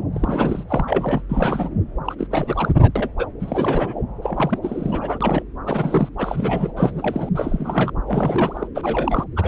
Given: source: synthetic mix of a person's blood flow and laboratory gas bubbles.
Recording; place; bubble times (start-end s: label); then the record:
Doppler ultrasound of blood flow; subclavian vein
0.00-0.02 s: bubbles
0.13-0.64 s: bubbles
0.68-1.21 s: bubbles
1.28-1.70 s: bubbles
2.04-2.15 s: bubbles
2.19-2.27 s: bubbles
2.30-2.71 s: bubbles
2.81-2.92 s: bubbles
2.96-3.09 s: bubbles
3.17-3.27 s: bubbles
3.40-3.96 s: bubbles
4.21-4.59 s: bubbles
4.61-5.42 s: bubbles
5.65-6.09 s: bubbles
6.18-6.71 s: bubbles
6.76-7.29 s: bubbles
7.35-7.91 s: bubbles
8.06-8.67 s: bubbles
8.74-9.24 s: bubbles
9.36-9.48 s: bubbles
From the record:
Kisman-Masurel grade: 332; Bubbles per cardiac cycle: rolling drumbeat, 9 or more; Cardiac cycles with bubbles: 50 to 99%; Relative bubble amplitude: moderate (0.250 to 0.450); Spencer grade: 3 (all of the cardiac periods contain showers or single bubble signals, but not dominating or overriding the cardiac motion signals); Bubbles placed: anywhere in the cardiac cycle